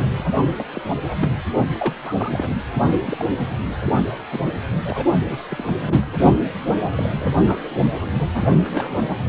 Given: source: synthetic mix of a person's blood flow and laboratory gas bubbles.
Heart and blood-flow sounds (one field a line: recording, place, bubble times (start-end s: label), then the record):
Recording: Doppler ultrasound of blood flow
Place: precordium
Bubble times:
0.00-0.26 s: bubbles
0.56-0.65 s: bubbles
0.73-0.82 s: bubbles
0.88-0.95 s: bubbles
1.02-1.29 s: bubbles
1.32-1.38 s: bubbles
1.73-1.94 s: bubbles
2.04-2.56 s: bubbles
3.06-3.26 s: bubbles
3.51-3.56 s: bubbles
3.85-3.93 s: bubbles
4.10-4.17 s: bubbles
4.31-4.39 s: bubbles
4.84-5.05 s: bubbles
5.10-5.18 s: bubbles
5.25-5.39 s: bubbles
5.48-6.11 s: bubbles
6.63-6.75 s: bubbles
6.96-7.09 s: bubbles
7.16-7.61 s: bubbles
8.01-8.05 s: bubbles
8.34-8.53 s: bubbles
8.65-8.96 s: bubbles
From the record:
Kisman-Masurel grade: 342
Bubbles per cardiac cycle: rolling drumbeat, 9 or more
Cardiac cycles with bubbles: 100%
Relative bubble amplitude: moderate (0.250 to 0.450)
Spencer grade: 3 (all of the cardiac periods contain showers or single bubble signals, but not dominating or overriding the cardiac motion signals)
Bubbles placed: only in the low amplitude regions of the cardiac cycle